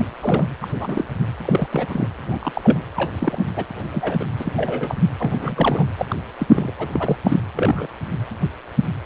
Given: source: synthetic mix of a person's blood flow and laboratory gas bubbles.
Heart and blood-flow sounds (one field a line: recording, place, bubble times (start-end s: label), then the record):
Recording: Doppler ultrasound of blood flow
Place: precordium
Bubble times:
0.00-0.07 s: bubbles
0.22-0.44 s: bubbles
0.61-0.68 s: bubbles
0.78-1.06 s: bubbles
1.45-1.68 s: bubbles
1.71-2.08 s: bubbles
2.27-2.77 s: bubbles
2.96-3.10 s: bubbles
3.19-3.43 s: bubbles
3.56-3.65 s: bubbles
3.92-4.24 s: bubbles
4.39-4.53 s: bubbles
4.56-4.96 s: bubbles
5.18-5.88 s: bubbles
5.98-6.05 s: bubbles
6.09-6.16 s: bubbles
6.38-6.72 s: bubbles
6.78-6.88 s: bubbles
6.92-7.17 s: bubbles
7.23-7.40 s: bubbles
7.55-7.88 s: bubbles
From the record:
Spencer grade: 3 (all of the cardiac periods contain showers or single bubble signals, but not dominating or overriding the cardiac motion signals)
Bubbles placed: anywhere in the cardiac cycle